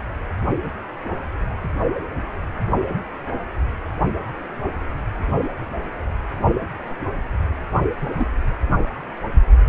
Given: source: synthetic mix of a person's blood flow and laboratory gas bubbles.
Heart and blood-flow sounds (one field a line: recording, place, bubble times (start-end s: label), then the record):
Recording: Doppler ultrasound of blood flow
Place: precordium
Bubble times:
7.99-8.30 s: bubbles
From the record:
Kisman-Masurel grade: 112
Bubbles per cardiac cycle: 1 to 2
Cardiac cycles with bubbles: 1 to 10%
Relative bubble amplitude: moderate (0.250 to 0.450)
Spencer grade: 1 (occasional bubble signal discernible with the cardiac motion signal, with majority of cardiac periods free of bubbles)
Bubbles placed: only in the low amplitude regions of the cardiac cycle